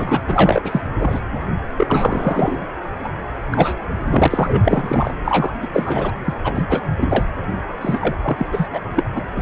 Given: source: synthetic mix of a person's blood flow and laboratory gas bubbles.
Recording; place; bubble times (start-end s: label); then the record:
Doppler ultrasound of blood flow; precordium
0.00-0.23 s: bubbles
0.27-0.61 s: bubbles
0.64-0.81 s: bubbles
0.99-1.21 s: bubbles
1.77-2.63 s: bubbles
3.04-3.09 s: bubbles
3.51-3.86 s: bubbles
4.12-5.12 s: bubbles
5.24-5.51 s: bubbles
5.62-5.68 s: bubbles
5.73-6.11 s: bubbles
6.25-6.34 s: bubbles
6.44-6.86 s: bubbles
6.96-7.25 s: bubbles
7.81-8.17 s: bubbles
8.22-8.46 s: bubbles
8.52-8.68 s: bubbles
8.73-8.80 s: bubbles
8.96-9.04 s: bubbles
9.15-9.21 s: bubbles
9.36-9.42 s: bubbles
From the record:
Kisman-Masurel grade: 343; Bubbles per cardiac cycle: rolling drumbeat, 9 or more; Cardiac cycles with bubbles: 100%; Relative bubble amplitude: loud (0.450 to 0.775); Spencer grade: 3 (all of the cardiac periods contain showers or single bubble signals, but not dominating or overriding the cardiac motion signals); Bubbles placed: anywhere in the cardiac cycle